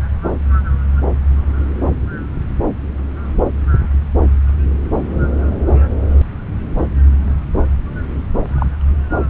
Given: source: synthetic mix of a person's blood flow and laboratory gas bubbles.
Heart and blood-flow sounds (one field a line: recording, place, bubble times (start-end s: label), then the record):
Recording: Doppler ultrasound of blood flow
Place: subclavian vein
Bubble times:
8.56-8.66 s: bubbles
From the record:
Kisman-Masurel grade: 112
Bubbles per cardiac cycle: 1 to 2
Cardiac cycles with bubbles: 1 to 10%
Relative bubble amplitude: moderate (0.250 to 0.450)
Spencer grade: 1 (occasional bubble signal discernible with the cardiac motion signal, with majority of cardiac periods free of bubbles)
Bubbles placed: anywhere in the cardiac cycle